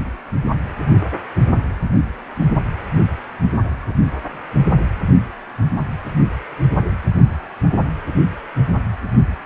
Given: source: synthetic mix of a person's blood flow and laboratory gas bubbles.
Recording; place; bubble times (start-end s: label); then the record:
Doppler ultrasound of blood flow; precordium
no bubbles
From the record:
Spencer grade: 0 (complete lack of bubble signals)